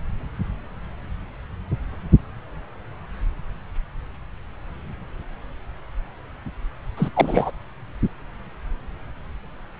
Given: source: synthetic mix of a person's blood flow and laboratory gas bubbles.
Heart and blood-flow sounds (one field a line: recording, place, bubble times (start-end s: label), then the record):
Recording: Doppler ultrasound of blood flow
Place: subclavian vein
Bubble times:
6.97-7.08 s: bubbles
7.14-7.51 s: bubbles
From the record:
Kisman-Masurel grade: 212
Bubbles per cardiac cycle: several, 3 to 8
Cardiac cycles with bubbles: 1 to 10%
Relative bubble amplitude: moderate (0.250 to 0.450)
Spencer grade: 1 (occasional bubble signal discernible with the cardiac motion signal, with majority of cardiac periods free of bubbles)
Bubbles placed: anywhere in the cardiac cycle